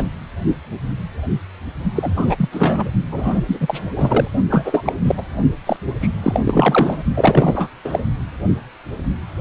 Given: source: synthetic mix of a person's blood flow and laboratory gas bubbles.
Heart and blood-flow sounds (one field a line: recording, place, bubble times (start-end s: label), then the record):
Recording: Doppler ultrasound of blood flow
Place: precordium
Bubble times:
0.00-0.03 s: bubbles
1.96-2.11 s: bubbles
2.15-2.49 s: bubbles
2.52-2.88 s: bubbles
3.11-3.42 s: bubbles
3.48-3.58 s: bubbles
3.60-3.79 s: bubbles
3.96-4.28 s: bubbles
4.50-4.92 s: bubbles
5.04-5.23 s: bubbles
5.66-5.76 s: bubbles
6.00-6.09 s: bubbles
6.23-6.40 s: bubbles
6.44-7.03 s: bubbles
7.14-7.69 s: bubbles
7.84-8.04 s: bubbles
From the record:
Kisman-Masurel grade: 333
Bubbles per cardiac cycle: rolling drumbeat, 9 or more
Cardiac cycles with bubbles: 50 to 99%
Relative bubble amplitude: loud (0.450 to 0.775)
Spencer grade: 3 (all of the cardiac periods contain showers or single bubble signals, but not dominating or overriding the cardiac motion signals)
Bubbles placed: only in the low amplitude regions of the cardiac cycle